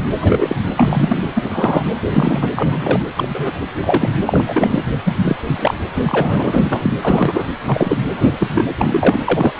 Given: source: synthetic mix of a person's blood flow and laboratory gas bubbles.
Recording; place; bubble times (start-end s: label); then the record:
Doppler ultrasound of blood flow; precordium
0.22-0.57 s: bubbles
0.76-1.28 s: bubbles
1.33-1.84 s: bubbles
2.05-2.49 s: bubbles
2.51-3.00 s: bubbles
3.17-3.51 s: bubbles
3.79-4.12 s: bubbles
4.26-4.83 s: bubbles
5.04-5.19 s: bubbles
5.25-5.37 s: bubbles
5.44-5.74 s: bubbles
5.95-6.92 s: bubbles
7.02-7.43 s: bubbles
7.67-7.98 s: bubbles
8.14-8.63 s: bubbles
8.78-9.21 s: bubbles
9.24-9.53 s: bubbles
9.57-9.59 s: bubbles
From the record:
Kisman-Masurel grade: 243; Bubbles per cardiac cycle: several, 3 to 8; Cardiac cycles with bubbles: 100%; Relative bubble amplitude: loud (0.450 to 0.775); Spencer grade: 3 (all of the cardiac periods contain showers or single bubble signals, but not dominating or overriding the cardiac motion signals); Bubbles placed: anywhere in the cardiac cycle